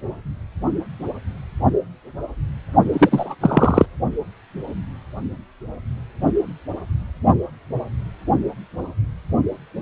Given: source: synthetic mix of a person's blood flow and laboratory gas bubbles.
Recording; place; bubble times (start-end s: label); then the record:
Doppler ultrasound of blood flow; precordium
2.92-3.35 s: bubbles
3.40-3.86 s: bubbles
From the record:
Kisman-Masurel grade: 213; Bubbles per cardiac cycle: several, 3 to 8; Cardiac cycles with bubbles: 1 to 10%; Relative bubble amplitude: loud (0.450 to 0.775); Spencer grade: 1 (occasional bubble signal discernible with the cardiac motion signal, with majority of cardiac periods free of bubbles); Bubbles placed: only in the low amplitude regions of the cardiac cycle